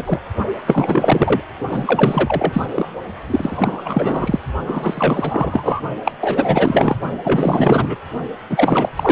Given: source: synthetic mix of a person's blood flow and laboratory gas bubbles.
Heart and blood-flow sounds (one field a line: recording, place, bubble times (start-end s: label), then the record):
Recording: Doppler ultrasound of blood flow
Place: precordium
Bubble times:
0.00-0.19 s: bubbles
0.66-1.43 s: bubbles
1.68-2.66 s: bubbles
2.75-2.88 s: bubbles
3.28-4.39 s: bubbles
4.66-5.81 s: bubbles
6.04-6.12 s: bubbles
6.20-6.96 s: bubbles
7.24-7.97 s: bubbles
8.49-8.89 s: bubbles
8.96-9.12 s: bubbles
From the record:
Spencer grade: 4 (maximum detectable bubble signal sounding continuously throughout systole and diastole of every cardiac period, and overriding the amplitude of the normal cardiac signals)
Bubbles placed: only in the low amplitude regions of the cardiac cycle